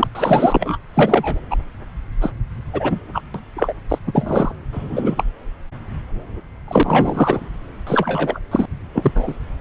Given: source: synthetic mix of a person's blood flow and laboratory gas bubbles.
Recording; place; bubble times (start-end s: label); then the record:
Doppler ultrasound of blood flow; subclavian vein
0.00-0.07 s: bubbles
0.15-0.77 s: bubbles
0.93-1.40 s: bubbles
1.50-1.56 s: bubbles
2.21-2.31 s: bubbles
2.73-3.00 s: bubbles
3.13-3.21 s: bubbles
3.34-3.40 s: bubbles
3.56-3.73 s: bubbles
3.89-3.98 s: bubbles
4.06-4.52 s: bubbles
4.72-5.24 s: bubbles
6.68-7.46 s: bubbles
7.87-8.39 s: bubbles
8.51-8.66 s: bubbles
8.94-9.12 s: bubbles
9.15-9.34 s: bubbles
From the record:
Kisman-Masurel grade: 243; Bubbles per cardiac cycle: several, 3 to 8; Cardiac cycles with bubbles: 100%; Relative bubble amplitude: loud (0.450 to 0.775); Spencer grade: 3 (all of the cardiac periods contain showers or single bubble signals, but not dominating or overriding the cardiac motion signals); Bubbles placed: anywhere in the cardiac cycle